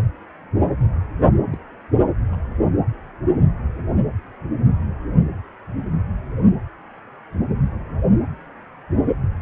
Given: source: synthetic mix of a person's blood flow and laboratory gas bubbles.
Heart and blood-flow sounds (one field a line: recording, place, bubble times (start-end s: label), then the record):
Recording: Doppler ultrasound of blood flow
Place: precordium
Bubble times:
1.51-1.57 s: bubbles
2.33-2.35 s: bubbles
From the record:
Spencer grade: 2 (many but less than half of the cardiac periods contain bubble signals, singularly or in groups)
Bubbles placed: anywhere in the cardiac cycle